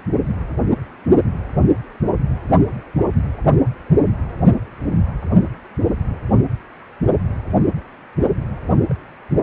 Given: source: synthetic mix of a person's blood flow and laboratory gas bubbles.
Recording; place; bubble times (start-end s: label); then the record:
Doppler ultrasound of blood flow; precordium
8.89-8.94 s: bubbles
From the record:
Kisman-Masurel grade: 111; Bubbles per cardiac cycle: 1 to 2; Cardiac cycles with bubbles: 1 to 10%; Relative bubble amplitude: barely perceptible (0.100 to 0.250); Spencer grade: 1 (occasional bubble signal discernible with the cardiac motion signal, with majority of cardiac periods free of bubbles); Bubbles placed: only in the low amplitude regions of the cardiac cycle